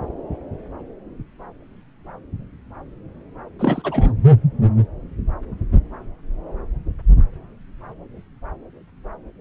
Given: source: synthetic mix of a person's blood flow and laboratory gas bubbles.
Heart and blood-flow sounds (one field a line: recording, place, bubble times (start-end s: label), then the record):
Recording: Doppler ultrasound of blood flow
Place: subclavian vein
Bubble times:
3.59-4.12 s: bubbles
From the record:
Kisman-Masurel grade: 212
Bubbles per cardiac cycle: several, 3 to 8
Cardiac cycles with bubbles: 1 to 10%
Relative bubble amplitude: moderate (0.250 to 0.450)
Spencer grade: 1 (occasional bubble signal discernible with the cardiac motion signal, with majority of cardiac periods free of bubbles)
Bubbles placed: anywhere in the cardiac cycle